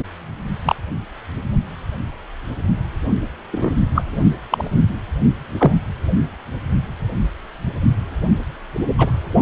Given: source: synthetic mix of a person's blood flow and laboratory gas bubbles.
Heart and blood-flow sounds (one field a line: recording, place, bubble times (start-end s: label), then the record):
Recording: Doppler ultrasound of blood flow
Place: precordium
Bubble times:
0.65-0.76 s: bubbles
3.51-3.71 s: bubbles
3.94-4.03 s: bubbles
4.49-4.71 s: bubbles
5.57-5.81 s: bubbles
8.98-9.12 s: bubbles
From the record:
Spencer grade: 2 (many but less than half of the cardiac periods contain bubble signals, singularly or in groups)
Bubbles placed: only in the low amplitude regions of the cardiac cycle